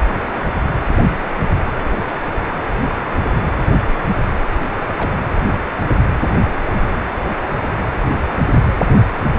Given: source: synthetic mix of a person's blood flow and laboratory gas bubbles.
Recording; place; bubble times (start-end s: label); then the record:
Doppler ultrasound of blood flow; precordium
4.81-4.89 s: bubbles
4.92-5.14 s: bubbles
From the record:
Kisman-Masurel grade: 221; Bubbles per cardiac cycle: several, 3 to 8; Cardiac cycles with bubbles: 10 to 50%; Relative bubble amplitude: barely perceptible (0.100 to 0.250); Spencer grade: 2 (many but less than half of the cardiac periods contain bubble signals, singularly or in groups); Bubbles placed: anywhere in the cardiac cycle